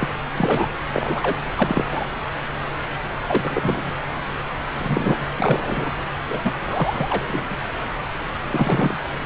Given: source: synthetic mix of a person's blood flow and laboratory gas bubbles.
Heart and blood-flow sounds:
Doppler ultrasound of blood flow; subclavian vein
0.00-0.07 s: bubbles
0.37-0.69 s: bubbles
0.93-1.36 s: bubbles
1.55-2.07 s: bubbles
3.21-3.94 s: bubbles
4.78-5.26 s: bubbles
5.36-5.95 s: bubbles
6.28-6.40 s: bubbles
6.43-6.54 s: bubbles
6.63-7.22 s: bubbles
7.30-7.42 s: bubbles
7.50-7.56 s: bubbles
8.48-8.98 s: bubbles
From the record:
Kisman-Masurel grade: 232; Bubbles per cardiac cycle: several, 3 to 8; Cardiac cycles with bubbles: 50 to 99%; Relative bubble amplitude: moderate (0.250 to 0.450); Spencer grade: 3 (all of the cardiac periods contain showers or single bubble signals, but not dominating or overriding the cardiac motion signals); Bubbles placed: anywhere in the cardiac cycle

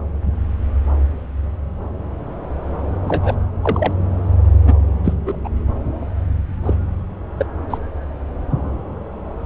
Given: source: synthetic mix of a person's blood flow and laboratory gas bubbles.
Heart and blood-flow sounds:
Doppler ultrasound of blood flow; subclavian vein
3.06-3.35 s: bubbles
3.62-3.93 s: bubbles
4.67-4.74 s: bubbles
5.04-5.13 s: bubbles
5.26-5.49 s: bubbles
6.63-6.74 s: bubbles
7.37-7.46 s: bubbles
7.70-7.78 s: bubbles
From the record:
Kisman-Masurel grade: 232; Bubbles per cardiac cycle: several, 3 to 8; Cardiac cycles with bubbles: 50 to 99%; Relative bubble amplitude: moderate (0.250 to 0.450); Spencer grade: 3 (all of the cardiac periods contain showers or single bubble signals, but not dominating or overriding the cardiac motion signals); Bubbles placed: anywhere in the cardiac cycle

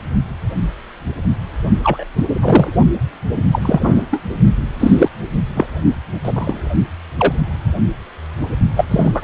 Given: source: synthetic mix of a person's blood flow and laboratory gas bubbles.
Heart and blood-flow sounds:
Doppler ultrasound of blood flow; precordium
1.83-2.07 s: bubbles
2.15-2.24 s: bubbles
2.29-2.73 s: bubbles
3.51-4.02 s: bubbles
4.11-4.21 s: bubbles
4.79-5.08 s: bubbles
5.54-5.67 s: bubbles
6.24-6.32 s: bubbles
6.35-6.61 s: bubbles
7.17-7.33 s: bubbles
8.75-8.85 s: bubbles
8.90-9.24 s: bubbles
From the record:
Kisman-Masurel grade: 233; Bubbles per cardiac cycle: several, 3 to 8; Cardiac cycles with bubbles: 50 to 99%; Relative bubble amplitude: loud (0.450 to 0.775); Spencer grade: 3 (all of the cardiac periods contain showers or single bubble signals, but not dominating or overriding the cardiac motion signals); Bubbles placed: only in the low amplitude regions of the cardiac cycle

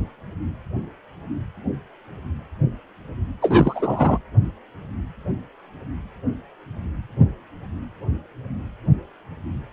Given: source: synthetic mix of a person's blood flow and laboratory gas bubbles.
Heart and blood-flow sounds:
Doppler ultrasound of blood flow; precordium
3.41-4.19 s: bubbles
From the record:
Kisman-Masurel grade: 223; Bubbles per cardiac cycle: several, 3 to 8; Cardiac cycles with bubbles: 10 to 50%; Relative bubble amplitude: loud (0.450 to 0.775); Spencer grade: 2 (many but less than half of the cardiac periods contain bubble signals, singularly or in groups); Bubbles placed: anywhere in the cardiac cycle

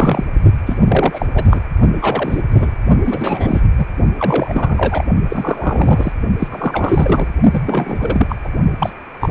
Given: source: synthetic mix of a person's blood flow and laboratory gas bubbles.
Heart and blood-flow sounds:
Doppler ultrasound of blood flow; precordium
0.00-0.24 s: bubbles
0.66-0.76 s: bubbles
0.88-1.26 s: bubbles
1.34-1.61 s: bubbles
2.00-2.42 s: bubbles
2.50-2.71 s: bubbles
3.04-3.62 s: bubbles
3.78-3.86 s: bubbles
4.17-5.07 s: bubbles
5.29-6.12 s: bubbles
6.40-7.29 s: bubbles
7.50-7.63 s: bubbles
7.66-8.35 s: bubbles
8.44-8.49 s: bubbles
8.79-8.90 s: bubbles
9.21-9.31 s: bubbles
From the record:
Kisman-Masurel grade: 343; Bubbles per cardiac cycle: rolling drumbeat, 9 or more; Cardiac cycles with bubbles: 100%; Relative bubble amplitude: loud (0.450 to 0.775); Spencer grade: 3 (all of the cardiac periods contain showers or single bubble signals, but not dominating or overriding the cardiac motion signals); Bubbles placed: only in the low amplitude regions of the cardiac cycle

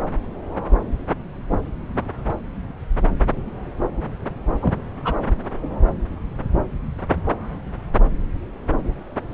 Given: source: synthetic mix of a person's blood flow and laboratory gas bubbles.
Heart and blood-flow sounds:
Doppler ultrasound of blood flow; subclavian vein
4.61-4.74 s: bubbles
5.04-5.15 s: bubbles
From the record:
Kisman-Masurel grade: 112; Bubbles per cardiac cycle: 1 to 2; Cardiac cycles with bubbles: 1 to 10%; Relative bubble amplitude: moderate (0.250 to 0.450); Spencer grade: 1 (occasional bubble signal discernible with the cardiac motion signal, with majority of cardiac periods free of bubbles); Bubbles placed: anywhere in the cardiac cycle

